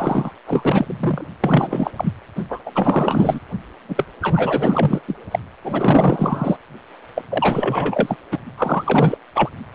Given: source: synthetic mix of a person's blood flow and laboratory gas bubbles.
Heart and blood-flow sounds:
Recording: Doppler ultrasound of blood flow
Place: precordium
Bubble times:
0.00-0.32 s: bubbles
0.47-1.27 s: bubbles
1.44-1.92 s: bubbles
1.96-2.11 s: bubbles
2.35-2.44 s: bubbles
2.49-2.59 s: bubbles
2.65-2.72 s: bubbles
2.75-3.40 s: bubbles
3.88-4.06 s: bubbles
4.21-5.00 s: bubbles
5.07-5.15 s: bubbles
5.31-5.39 s: bubbles
5.64-6.57 s: bubbles
7.15-7.24 s: bubbles
7.29-8.16 s: bubbles
8.31-8.39 s: bubbles
8.57-9.18 s: bubbles
9.35-9.50 s: bubbles
From the record:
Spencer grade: 4 (maximum detectable bubble signal sounding continuously throughout systole and diastole of every cardiac period, and overriding the amplitude of the normal cardiac signals)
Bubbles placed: anywhere in the cardiac cycle

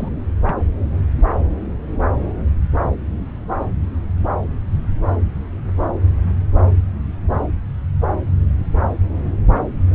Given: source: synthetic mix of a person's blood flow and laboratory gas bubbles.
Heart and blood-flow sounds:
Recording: Doppler ultrasound of blood flow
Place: subclavian vein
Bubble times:
0.00-0.09 s: bubbles
0.46-0.54 s: bubbles
From the record:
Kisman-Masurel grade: 111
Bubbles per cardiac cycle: 1 to 2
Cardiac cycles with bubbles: 1 to 10%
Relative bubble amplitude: barely perceptible (0.100 to 0.250)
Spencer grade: 1 (occasional bubble signal discernible with the cardiac motion signal, with majority of cardiac periods free of bubbles)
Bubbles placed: anywhere in the cardiac cycle

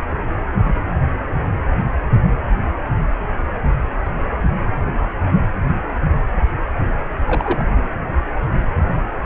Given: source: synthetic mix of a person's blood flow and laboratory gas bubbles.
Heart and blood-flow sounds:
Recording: Doppler ultrasound of blood flow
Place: precordium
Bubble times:
7.26-7.65 s: bubbles
From the record:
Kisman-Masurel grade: 112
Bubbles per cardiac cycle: 1 to 2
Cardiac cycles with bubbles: 1 to 10%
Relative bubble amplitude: moderate (0.250 to 0.450)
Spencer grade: 1 (occasional bubble signal discernible with the cardiac motion signal, with majority of cardiac periods free of bubbles)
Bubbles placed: anywhere in the cardiac cycle

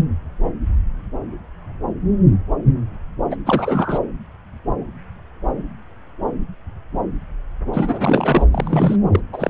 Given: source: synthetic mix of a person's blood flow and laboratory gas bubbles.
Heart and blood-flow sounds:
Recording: Doppler ultrasound of blood flow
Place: subclavian vein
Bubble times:
3.29-3.35 s: bubbles
3.46-3.98 s: bubbles
7.73-8.47 s: bubbles
8.51-8.96 s: bubbles
9.12-9.20 s: bubbles
9.32-9.50 s: bubbles
From the record:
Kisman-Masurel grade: 222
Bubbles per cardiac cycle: several, 3 to 8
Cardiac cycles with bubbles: 10 to 50%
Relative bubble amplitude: moderate (0.250 to 0.450)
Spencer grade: 2 (many but less than half of the cardiac periods contain bubble signals, singularly or in groups)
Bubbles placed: anywhere in the cardiac cycle

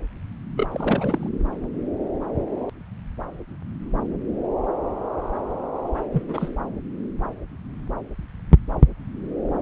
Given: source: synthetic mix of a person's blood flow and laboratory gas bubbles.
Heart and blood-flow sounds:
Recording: Doppler ultrasound of blood flow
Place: subclavian vein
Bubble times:
0.55-0.67 s: bubbles
0.71-1.29 s: bubbles
6.13-6.23 s: bubbles
6.28-6.49 s: bubbles
From the record:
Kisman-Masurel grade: 221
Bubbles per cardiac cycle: several, 3 to 8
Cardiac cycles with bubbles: 10 to 50%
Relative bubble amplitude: barely perceptible (0.100 to 0.250)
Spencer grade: 2 (many but less than half of the cardiac periods contain bubble signals, singularly or in groups)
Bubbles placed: anywhere in the cardiac cycle

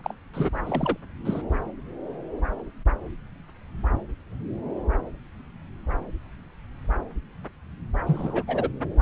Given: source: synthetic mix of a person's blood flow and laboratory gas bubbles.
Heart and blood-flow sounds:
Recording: Doppler ultrasound of blood flow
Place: subclavian vein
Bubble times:
0.04-0.14 s: bubbles
0.33-0.49 s: bubbles
0.66-0.97 s: bubbles
1.25-1.42 s: bubbles
8.06-8.43 s: bubbles
8.47-8.70 s: bubbles
From the record:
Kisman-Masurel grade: 221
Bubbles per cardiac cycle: several, 3 to 8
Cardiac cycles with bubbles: 10 to 50%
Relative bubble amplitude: barely perceptible (0.100 to 0.250)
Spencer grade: 2 (many but less than half of the cardiac periods contain bubble signals, singularly or in groups)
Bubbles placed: anywhere in the cardiac cycle

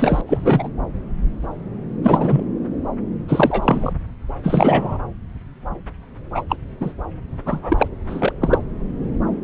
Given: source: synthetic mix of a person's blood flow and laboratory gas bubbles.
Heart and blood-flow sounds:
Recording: Doppler ultrasound of blood flow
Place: subclavian vein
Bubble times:
0.00-0.21 s: bubbles
0.27-0.68 s: bubbles
2.02-2.44 s: bubbles
3.28-3.93 s: bubbles
4.43-4.98 s: bubbles
6.34-6.42 s: bubbles
6.49-6.56 s: bubbles
6.80-6.92 s: bubbles
7.46-7.88 s: bubbles
8.08-8.32 s: bubbles
8.40-8.58 s: bubbles
From the record:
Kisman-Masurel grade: 233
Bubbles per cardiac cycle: several, 3 to 8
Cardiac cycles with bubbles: 50 to 99%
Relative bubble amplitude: loud (0.450 to 0.775)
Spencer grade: 3 (all of the cardiac periods contain showers or single bubble signals, but not dominating or overriding the cardiac motion signals)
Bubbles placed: anywhere in the cardiac cycle

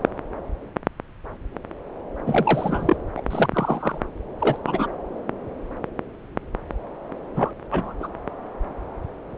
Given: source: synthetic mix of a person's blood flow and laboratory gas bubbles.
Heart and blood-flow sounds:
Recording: Doppler ultrasound of blood flow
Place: subclavian vein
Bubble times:
2.26-2.96 s: bubbles
3.16-3.21 s: bubbles
3.30-3.50 s: bubbles
3.52-3.99 s: bubbles
4.38-4.58 s: bubbles
4.63-4.87 s: bubbles
7.36-7.51 s: bubbles
7.71-7.92 s: bubbles
8.00-8.08 s: bubbles
From the record:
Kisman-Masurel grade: 222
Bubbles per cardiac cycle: several, 3 to 8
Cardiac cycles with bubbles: 10 to 50%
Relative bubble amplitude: moderate (0.250 to 0.450)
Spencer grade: 2 (many but less than half of the cardiac periods contain bubble signals, singularly or in groups)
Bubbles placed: anywhere in the cardiac cycle

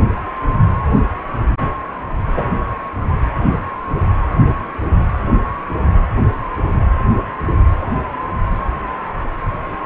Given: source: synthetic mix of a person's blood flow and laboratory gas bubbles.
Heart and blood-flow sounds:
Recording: Doppler ultrasound of blood flow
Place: precordium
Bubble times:
2.37-2.47 s: bubbles
From the record:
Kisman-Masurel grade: 113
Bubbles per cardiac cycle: 1 to 2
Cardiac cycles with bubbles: 1 to 10%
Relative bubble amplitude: loud (0.450 to 0.775)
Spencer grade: 1 (occasional bubble signal discernible with the cardiac motion signal, with majority of cardiac periods free of bubbles)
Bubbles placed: anywhere in the cardiac cycle

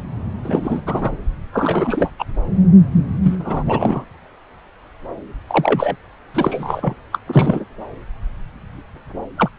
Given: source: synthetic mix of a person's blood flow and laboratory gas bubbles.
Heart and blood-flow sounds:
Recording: Doppler ultrasound of blood flow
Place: subclavian vein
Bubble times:
0.43-0.81 s: bubbles
0.86-1.17 s: bubbles
1.53-2.10 s: bubbles
2.19-2.25 s: bubbles
3.23-3.36 s: bubbles
3.39-4.04 s: bubbles
5.47-5.96 s: bubbles
6.33-6.95 s: bubbles
7.12-7.18 s: bubbles
7.27-7.64 s: bubbles
9.37-9.49 s: bubbles
From the record:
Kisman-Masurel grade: 233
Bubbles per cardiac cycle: several, 3 to 8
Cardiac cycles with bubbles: 50 to 99%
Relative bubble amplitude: loud (0.450 to 0.775)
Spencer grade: 3 (all of the cardiac periods contain showers or single bubble signals, but not dominating or overriding the cardiac motion signals)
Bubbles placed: anywhere in the cardiac cycle

